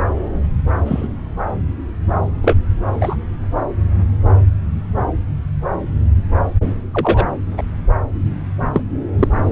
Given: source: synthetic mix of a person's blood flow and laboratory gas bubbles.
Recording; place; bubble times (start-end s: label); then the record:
Doppler ultrasound of blood flow; subclavian vein
0.86-1.08 s: bubbles
2.42-2.56 s: bubbles
2.93-3.16 s: bubbles
6.92-7.25 s: bubbles
7.58-7.63 s: bubbles
8.73-8.81 s: bubbles
9.19-9.28 s: bubbles
From the record:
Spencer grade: 2 (many but less than half of the cardiac periods contain bubble signals, singularly or in groups); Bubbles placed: anywhere in the cardiac cycle